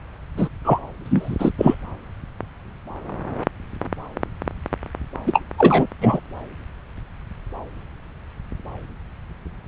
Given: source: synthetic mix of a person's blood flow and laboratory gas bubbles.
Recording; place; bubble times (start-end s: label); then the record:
Doppler ultrasound of blood flow; subclavian vein
0.37-0.48 s: bubbles
0.64-0.80 s: bubbles
1.04-1.50 s: bubbles
1.57-1.75 s: bubbles
5.27-5.42 s: bubbles
5.58-5.87 s: bubbles
6.01-6.20 s: bubbles
From the record:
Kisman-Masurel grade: 223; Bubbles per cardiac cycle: several, 3 to 8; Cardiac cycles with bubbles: 10 to 50%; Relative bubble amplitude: loud (0.450 to 0.775); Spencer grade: 2 (many but less than half of the cardiac periods contain bubble signals, singularly or in groups); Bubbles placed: anywhere in the cardiac cycle